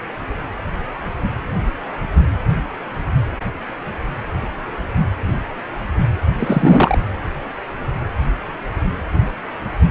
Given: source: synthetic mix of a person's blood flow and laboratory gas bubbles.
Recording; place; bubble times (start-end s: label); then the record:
Doppler ultrasound of blood flow; precordium
6.38-6.98 s: bubbles
From the record:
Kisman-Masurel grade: 213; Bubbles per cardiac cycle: several, 3 to 8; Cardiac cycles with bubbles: 1 to 10%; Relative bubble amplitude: loud (0.450 to 0.775); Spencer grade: 1 (occasional bubble signal discernible with the cardiac motion signal, with majority of cardiac periods free of bubbles); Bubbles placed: anywhere in the cardiac cycle